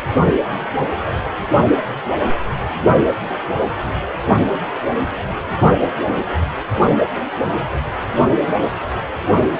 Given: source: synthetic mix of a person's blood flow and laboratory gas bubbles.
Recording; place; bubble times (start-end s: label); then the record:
Doppler ultrasound of blood flow; precordium
no bubbles
From the record:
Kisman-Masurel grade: 000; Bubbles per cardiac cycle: 0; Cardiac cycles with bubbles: 0%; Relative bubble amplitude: no bubbles discernible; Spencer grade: 0 (complete lack of bubble signals)